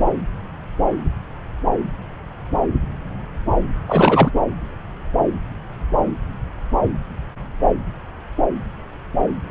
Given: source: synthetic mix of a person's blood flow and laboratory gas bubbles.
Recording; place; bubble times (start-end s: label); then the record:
Doppler ultrasound of blood flow; subclavian vein
3.88-4.30 s: bubbles
From the record:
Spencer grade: 1 (occasional bubble signal discernible with the cardiac motion signal, with majority of cardiac periods free of bubbles); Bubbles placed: anywhere in the cardiac cycle